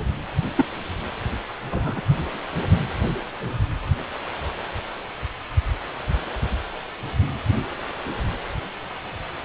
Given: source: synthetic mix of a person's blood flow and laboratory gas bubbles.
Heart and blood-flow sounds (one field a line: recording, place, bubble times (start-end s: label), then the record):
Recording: Doppler ultrasound of blood flow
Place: precordium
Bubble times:
0.56-0.65 s: bubbles
1.71-2.01 s: bubbles
From the record:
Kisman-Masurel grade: 122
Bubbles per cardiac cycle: 1 to 2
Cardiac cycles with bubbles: 10 to 50%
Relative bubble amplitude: moderate (0.250 to 0.450)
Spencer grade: 2 (many but less than half of the cardiac periods contain bubble signals, singularly or in groups)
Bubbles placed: anywhere in the cardiac cycle